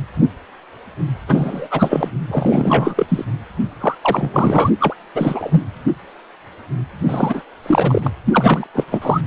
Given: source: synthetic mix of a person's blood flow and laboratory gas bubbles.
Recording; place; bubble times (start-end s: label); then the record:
Doppler ultrasound of blood flow; precordium
1.27-1.68 s: bubbles
1.71-2.10 s: bubbles
2.27-3.06 s: bubbles
3.08-3.25 s: bubbles
3.80-3.95 s: bubbles
4.02-4.70 s: bubbles
4.80-4.94 s: bubbles
5.15-5.63 s: bubbles
7.05-7.43 s: bubbles
7.62-8.11 s: bubbles
8.26-8.68 s: bubbles
8.75-8.84 s: bubbles
8.91-9.21 s: bubbles
From the record:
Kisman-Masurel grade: 333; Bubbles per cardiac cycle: rolling drumbeat, 9 or more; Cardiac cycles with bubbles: 50 to 99%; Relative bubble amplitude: loud (0.450 to 0.775); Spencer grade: 3 (all of the cardiac periods contain showers or single bubble signals, but not dominating or overriding the cardiac motion signals); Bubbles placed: anywhere in the cardiac cycle